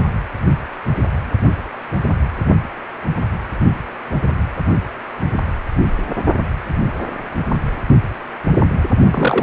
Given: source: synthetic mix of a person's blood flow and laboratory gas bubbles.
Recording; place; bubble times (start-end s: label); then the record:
Doppler ultrasound of blood flow; precordium
9.11-9.42 s: bubbles
From the record:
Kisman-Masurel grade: 213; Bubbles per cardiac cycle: several, 3 to 8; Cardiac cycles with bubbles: 1 to 10%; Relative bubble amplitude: loud (0.450 to 0.775); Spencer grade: 1 (occasional bubble signal discernible with the cardiac motion signal, with majority of cardiac periods free of bubbles); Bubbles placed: only in the low amplitude regions of the cardiac cycle